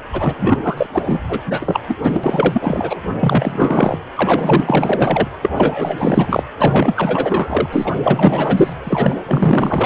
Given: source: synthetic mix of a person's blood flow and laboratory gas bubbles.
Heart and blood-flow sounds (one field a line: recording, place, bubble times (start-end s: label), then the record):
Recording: Doppler ultrasound of blood flow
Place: precordium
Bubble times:
0.12-0.34 s: bubbles
0.40-0.58 s: bubbles
0.63-0.74 s: bubbles
0.77-0.86 s: bubbles
0.94-1.21 s: bubbles
1.28-1.41 s: bubbles
1.46-1.80 s: bubbles
1.88-1.99 s: bubbles
2.02-2.21 s: bubbles
2.24-3.02 s: bubbles
3.20-3.98 s: bubbles
4.15-5.28 s: bubbles
5.42-5.50 s: bubbles
5.56-6.43 s: bubbles
6.58-7.68 s: bubbles
7.71-7.94 s: bubbles
8.03-8.74 s: bubbles
8.84-9.16 s: bubbles
9.27-9.86 s: bubbles
From the record:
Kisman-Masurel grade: 444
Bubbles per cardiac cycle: continuous sound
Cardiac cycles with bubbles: 100%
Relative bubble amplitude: maximal (0.775 to 0.999)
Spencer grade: 4 (maximum detectable bubble signal sounding continuously throughout systole and diastole of every cardiac period, and overriding the amplitude of the normal cardiac signals)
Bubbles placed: anywhere in the cardiac cycle